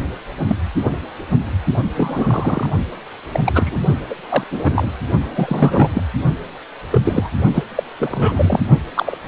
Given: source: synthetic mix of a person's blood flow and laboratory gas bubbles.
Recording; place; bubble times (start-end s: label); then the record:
Doppler ultrasound of blood flow; precordium
0.48-0.55 s: bubbles
0.83-0.97 s: bubbles
1.96-2.71 s: bubbles
3.32-3.40 s: bubbles
3.45-3.79 s: bubbles
4.10-4.15 s: bubbles
4.29-4.43 s: bubbles
4.50-4.92 s: bubbles
5.35-5.89 s: bubbles
5.95-6.03 s: bubbles
6.92-7.01 s: bubbles
7.04-7.29 s: bubbles
7.54-7.63 s: bubbles
7.76-7.84 s: bubbles
7.98-8.60 s: bubbles
8.94-9.18 s: bubbles
From the record:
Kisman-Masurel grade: 243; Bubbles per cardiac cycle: several, 3 to 8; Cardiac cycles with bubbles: 100%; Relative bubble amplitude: loud (0.450 to 0.775); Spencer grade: 3 (all of the cardiac periods contain showers or single bubble signals, but not dominating or overriding the cardiac motion signals); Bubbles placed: only in the low amplitude regions of the cardiac cycle